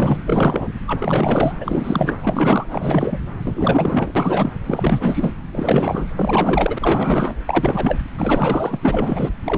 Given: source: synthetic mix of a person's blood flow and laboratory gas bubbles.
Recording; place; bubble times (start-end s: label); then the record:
Doppler ultrasound of blood flow; subclavian vein
0.00-0.19 s: bubbles
0.26-0.75 s: bubbles
0.86-1.54 s: bubbles
1.60-2.17 s: bubbles
2.20-2.67 s: bubbles
2.70-3.19 s: bubbles
3.44-4.12 s: bubbles
4.15-4.53 s: bubbles
4.66-5.33 s: bubbles
5.52-6.10 s: bubbles
6.17-6.79 s: bubbles
6.81-7.34 s: bubbles
7.46-8.02 s: bubbles
8.18-8.77 s: bubbles
8.82-9.29 s: bubbles
9.44-9.58 s: bubbles
From the record:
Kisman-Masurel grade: 444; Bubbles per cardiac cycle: continuous sound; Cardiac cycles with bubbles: 100%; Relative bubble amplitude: maximal (0.775 to 0.999); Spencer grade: 4 (maximum detectable bubble signal sounding continuously throughout systole and diastole of every cardiac period, and overriding the amplitude of the normal cardiac signals); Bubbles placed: anywhere in the cardiac cycle